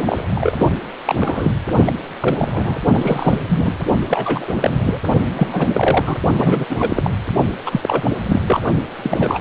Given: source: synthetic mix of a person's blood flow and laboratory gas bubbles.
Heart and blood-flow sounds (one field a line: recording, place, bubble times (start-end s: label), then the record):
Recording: Doppler ultrasound of blood flow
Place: precordium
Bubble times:
0.00-0.02 s: bubbles
0.06-0.66 s: bubbles
1.05-1.51 s: bubbles
1.85-1.93 s: bubbles
2.20-2.78 s: bubbles
2.84-3.40 s: bubbles
3.48-3.74 s: bubbles
4.07-5.00 s: bubbles
5.36-6.17 s: bubbles
6.37-6.66 s: bubbles
6.69-7.11 s: bubbles
7.66-8.11 s: bubbles
8.26-8.40 s: bubbles
8.47-8.60 s: bubbles
9.02-9.39 s: bubbles
From the record:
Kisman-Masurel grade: 333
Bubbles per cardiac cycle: rolling drumbeat, 9 or more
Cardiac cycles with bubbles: 50 to 99%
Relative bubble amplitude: loud (0.450 to 0.775)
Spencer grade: 3 (all of the cardiac periods contain showers or single bubble signals, but not dominating or overriding the cardiac motion signals)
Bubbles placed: only in the low amplitude regions of the cardiac cycle